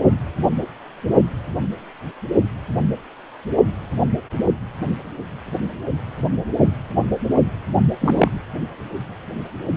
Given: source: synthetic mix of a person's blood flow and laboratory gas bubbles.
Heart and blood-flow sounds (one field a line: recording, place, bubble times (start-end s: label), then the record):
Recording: Doppler ultrasound of blood flow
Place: precordium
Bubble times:
8.00-8.30 s: bubbles
From the record:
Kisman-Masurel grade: 113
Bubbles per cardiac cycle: 1 to 2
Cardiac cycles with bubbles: 1 to 10%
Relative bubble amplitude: loud (0.450 to 0.775)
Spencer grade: 1 (occasional bubble signal discernible with the cardiac motion signal, with majority of cardiac periods free of bubbles)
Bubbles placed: only in the low amplitude regions of the cardiac cycle